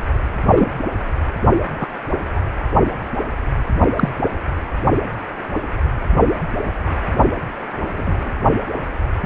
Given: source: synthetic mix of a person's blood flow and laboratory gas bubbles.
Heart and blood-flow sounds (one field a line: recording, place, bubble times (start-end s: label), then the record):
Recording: Doppler ultrasound of blood flow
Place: precordium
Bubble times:
0.44-0.67 s: bubbles
1.81-1.87 s: bubbles
2.35-2.40 s: bubbles
3.96-4.09 s: bubbles
7.96-8.32 s: bubbles
From the record:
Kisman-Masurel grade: 123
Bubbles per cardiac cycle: 1 to 2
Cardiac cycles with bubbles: 10 to 50%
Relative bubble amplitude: loud (0.450 to 0.775)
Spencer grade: 2 (many but less than half of the cardiac periods contain bubble signals, singularly or in groups)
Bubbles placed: only in the low amplitude regions of the cardiac cycle